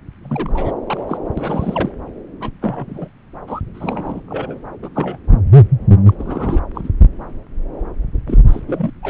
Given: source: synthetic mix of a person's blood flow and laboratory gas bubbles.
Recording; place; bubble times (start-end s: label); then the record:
Doppler ultrasound of blood flow; subclavian vein
0.23-0.75 s: bubbles
0.86-1.04 s: bubbles
1.07-1.18 s: bubbles
1.37-1.92 s: bubbles
2.40-2.50 s: bubbles
2.61-3.08 s: bubbles
3.47-3.61 s: bubbles
3.74-4.21 s: bubbles
4.28-4.62 s: bubbles
4.82-4.89 s: bubbles
4.95-5.19 s: bubbles
5.28-5.40 s: bubbles
6.06-6.15 s: bubbles
6.18-6.61 s: bubbles
6.75-6.88 s: bubbles
8.26-8.41 s: bubbles
8.47-8.61 s: bubbles
8.67-8.91 s: bubbles
9.02-9.10 s: bubbles
From the record:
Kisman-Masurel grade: 232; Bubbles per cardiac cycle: several, 3 to 8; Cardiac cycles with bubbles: 50 to 99%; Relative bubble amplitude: moderate (0.250 to 0.450); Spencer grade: 3 (all of the cardiac periods contain showers or single bubble signals, but not dominating or overriding the cardiac motion signals); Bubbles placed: anywhere in the cardiac cycle